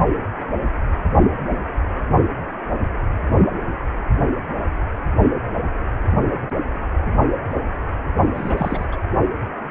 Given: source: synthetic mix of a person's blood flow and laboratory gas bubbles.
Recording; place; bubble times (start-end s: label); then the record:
Doppler ultrasound of blood flow; precordium
8.35-8.86 s: bubbles
8.92-8.96 s: bubbles
From the record:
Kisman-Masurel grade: 221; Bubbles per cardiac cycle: several, 3 to 8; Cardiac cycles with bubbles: 10 to 50%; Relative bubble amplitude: barely perceptible (0.100 to 0.250); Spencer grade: 2 (many but less than half of the cardiac periods contain bubble signals, singularly or in groups); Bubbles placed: only in the low amplitude regions of the cardiac cycle